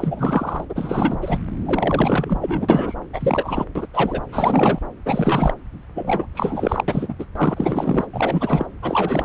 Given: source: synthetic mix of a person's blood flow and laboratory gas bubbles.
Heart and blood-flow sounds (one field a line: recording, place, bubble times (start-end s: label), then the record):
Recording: Doppler ultrasound of blood flow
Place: subclavian vein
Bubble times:
0.00-0.65 s: bubbles
0.69-1.17 s: bubbles
1.21-1.38 s: bubbles
1.65-2.99 s: bubbles
3.13-3.65 s: bubbles
3.75-3.87 s: bubbles
3.93-4.22 s: bubbles
4.32-4.79 s: bubbles
5.06-5.54 s: bubbles
5.94-6.27 s: bubbles
6.35-6.83 s: bubbles
6.88-7.15 s: bubbles
7.19-7.25 s: bubbles
7.35-8.06 s: bubbles
8.12-8.67 s: bubbles
8.81-9.24 s: bubbles
From the record:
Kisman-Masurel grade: 343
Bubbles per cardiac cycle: rolling drumbeat, 9 or more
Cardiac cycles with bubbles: 100%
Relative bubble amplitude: loud (0.450 to 0.775)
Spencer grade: 3 (all of the cardiac periods contain showers or single bubble signals, but not dominating or overriding the cardiac motion signals)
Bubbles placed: anywhere in the cardiac cycle